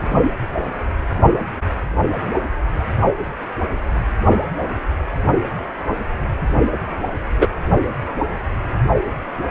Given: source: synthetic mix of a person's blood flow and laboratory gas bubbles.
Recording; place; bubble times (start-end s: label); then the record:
Doppler ultrasound of blood flow; precordium
7.39-7.47 s: bubbles
From the record:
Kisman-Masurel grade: 113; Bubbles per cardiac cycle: 1 to 2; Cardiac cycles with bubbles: 1 to 10%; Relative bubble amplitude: loud (0.450 to 0.775); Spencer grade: 1 (occasional bubble signal discernible with the cardiac motion signal, with majority of cardiac periods free of bubbles); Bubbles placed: only in the low amplitude regions of the cardiac cycle